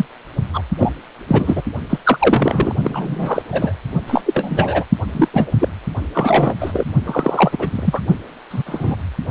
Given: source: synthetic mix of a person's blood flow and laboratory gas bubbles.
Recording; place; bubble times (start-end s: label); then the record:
Doppler ultrasound of blood flow; precordium
0.00-0.06 s: bubbles
0.53-0.62 s: bubbles
0.78-0.93 s: bubbles
1.27-1.62 s: bubbles
1.89-1.99 s: bubbles
2.04-2.75 s: bubbles
2.83-3.42 s: bubbles
3.52-3.72 s: bubbles
4.07-4.22 s: bubbles
4.25-4.84 s: bubbles
5.11-5.28 s: bubbles
5.33-5.51 s: bubbles
5.59-5.68 s: bubbles
6.14-6.55 s: bubbles
6.60-6.87 s: bubbles
7.05-8.01 s: bubbles
8.50-8.62 s: bubbles
8.66-8.96 s: bubbles
From the record:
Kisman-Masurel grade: 243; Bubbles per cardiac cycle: several, 3 to 8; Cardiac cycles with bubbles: 100%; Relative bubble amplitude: loud (0.450 to 0.775); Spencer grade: 3 (all of the cardiac periods contain showers or single bubble signals, but not dominating or overriding the cardiac motion signals); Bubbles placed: only in the low amplitude regions of the cardiac cycle